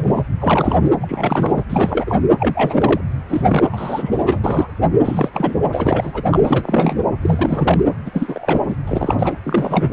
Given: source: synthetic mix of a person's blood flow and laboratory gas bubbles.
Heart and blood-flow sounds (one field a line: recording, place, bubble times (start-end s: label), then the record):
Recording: Doppler ultrasound of blood flow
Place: precordium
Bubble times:
0.00-0.25 s: bubbles
0.40-0.90 s: bubbles
1.01-1.64 s: bubbles
1.70-2.17 s: bubbles
2.40-3.01 s: bubbles
3.29-4.18 s: bubbles
4.26-4.39 s: bubbles
4.43-4.67 s: bubbles
5.03-5.29 s: bubbles
5.33-5.59 s: bubbles
5.72-6.22 s: bubbles
6.30-6.99 s: bubbles
7.21-7.80 s: bubbles
8.06-8.76 s: bubbles
8.87-9.34 s: bubbles
9.45-9.90 s: bubbles
From the record:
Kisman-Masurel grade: 342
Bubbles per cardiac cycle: rolling drumbeat, 9 or more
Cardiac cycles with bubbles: 100%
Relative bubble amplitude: moderate (0.250 to 0.450)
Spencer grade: 3 (all of the cardiac periods contain showers or single bubble signals, but not dominating or overriding the cardiac motion signals)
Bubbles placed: anywhere in the cardiac cycle